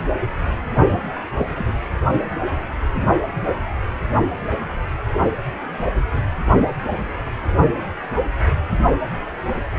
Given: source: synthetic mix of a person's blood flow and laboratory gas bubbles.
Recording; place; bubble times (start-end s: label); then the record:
Doppler ultrasound of blood flow; precordium
0.86-1.02 s: bubbles
1.38-1.47 s: bubbles
1.55-1.74 s: bubbles
From the record:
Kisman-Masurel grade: 211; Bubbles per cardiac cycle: several, 3 to 8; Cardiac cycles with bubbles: 1 to 10%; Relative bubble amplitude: barely perceptible (0.100 to 0.250); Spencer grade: 1 (occasional bubble signal discernible with the cardiac motion signal, with majority of cardiac periods free of bubbles); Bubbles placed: only in the low amplitude regions of the cardiac cycle